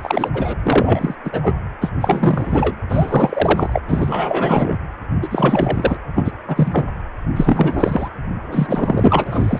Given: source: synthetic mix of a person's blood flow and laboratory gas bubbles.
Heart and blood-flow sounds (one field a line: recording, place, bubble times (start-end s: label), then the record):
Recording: Doppler ultrasound of blood flow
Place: precordium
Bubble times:
0.00-0.30 s: bubbles
0.33-0.54 s: bubbles
0.63-1.15 s: bubbles
1.25-1.31 s: bubbles
1.33-1.54 s: bubbles
1.81-1.92 s: bubbles
2.00-2.75 s: bubbles
2.89-3.82 s: bubbles
3.88-4.77 s: bubbles
5.22-5.97 s: bubbles
6.15-6.31 s: bubbles
6.47-6.86 s: bubbles
7.36-8.08 s: bubbles
8.51-9.60 s: bubbles
From the record:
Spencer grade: 3 (all of the cardiac periods contain showers or single bubble signals, but not dominating or overriding the cardiac motion signals)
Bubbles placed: anywhere in the cardiac cycle